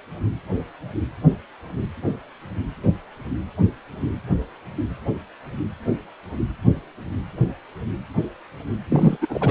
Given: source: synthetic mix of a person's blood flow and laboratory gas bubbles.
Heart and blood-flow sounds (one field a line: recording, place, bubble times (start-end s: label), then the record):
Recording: Doppler ultrasound of blood flow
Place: precordium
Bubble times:
8.89-9.17 s: bubbles
9.21-9.51 s: bubbles
From the record:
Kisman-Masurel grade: 212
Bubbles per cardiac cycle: several, 3 to 8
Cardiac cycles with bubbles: 1 to 10%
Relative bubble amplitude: moderate (0.250 to 0.450)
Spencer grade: 1 (occasional bubble signal discernible with the cardiac motion signal, with majority of cardiac periods free of bubbles)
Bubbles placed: anywhere in the cardiac cycle